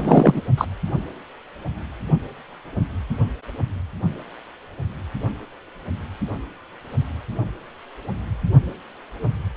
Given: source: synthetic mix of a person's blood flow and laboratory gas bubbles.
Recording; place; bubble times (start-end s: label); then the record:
Doppler ultrasound of blood flow; precordium
0.00-0.42 s: bubbles
0.57-0.65 s: bubbles
From the record:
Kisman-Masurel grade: 213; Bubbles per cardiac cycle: several, 3 to 8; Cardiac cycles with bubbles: 1 to 10%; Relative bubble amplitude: loud (0.450 to 0.775); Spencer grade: 1 (occasional bubble signal discernible with the cardiac motion signal, with majority of cardiac periods free of bubbles); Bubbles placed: anywhere in the cardiac cycle